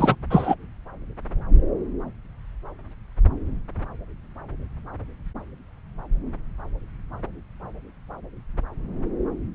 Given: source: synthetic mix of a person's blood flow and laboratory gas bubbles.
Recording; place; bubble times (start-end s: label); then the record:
Doppler ultrasound of blood flow; subclavian vein
0.00-0.16 s: bubbles
0.30-0.55 s: bubbles
From the record:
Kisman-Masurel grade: 213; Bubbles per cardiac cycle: several, 3 to 8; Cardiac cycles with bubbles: 1 to 10%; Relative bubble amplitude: loud (0.450 to 0.775); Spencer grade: 1 (occasional bubble signal discernible with the cardiac motion signal, with majority of cardiac periods free of bubbles); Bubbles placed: anywhere in the cardiac cycle